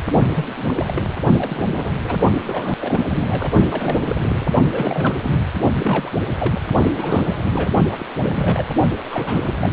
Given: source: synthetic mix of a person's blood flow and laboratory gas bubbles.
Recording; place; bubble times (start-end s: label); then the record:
Doppler ultrasound of blood flow; precordium
0.35-0.45 s: bubbles
0.56-1.04 s: bubbles
1.38-1.94 s: bubbles
2.03-2.16 s: bubbles
2.44-2.76 s: bubbles
2.80-3.01 s: bubbles
3.04-3.52 s: bubbles
3.70-4.16 s: bubbles
4.20-4.46 s: bubbles
4.71-5.43 s: bubbles
5.74-6.12 s: bubbles
6.33-6.62 s: bubbles
6.96-7.69 s: bubbles
7.90-8.05 s: bubbles
8.22-8.70 s: bubbles
9.04-9.54 s: bubbles
9.61-9.73 s: bubbles
From the record:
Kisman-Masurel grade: 342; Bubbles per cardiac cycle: rolling drumbeat, 9 or more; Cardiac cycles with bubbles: 100%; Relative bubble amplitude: moderate (0.250 to 0.450); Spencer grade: 3 (all of the cardiac periods contain showers or single bubble signals, but not dominating or overriding the cardiac motion signals); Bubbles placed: only in the low amplitude regions of the cardiac cycle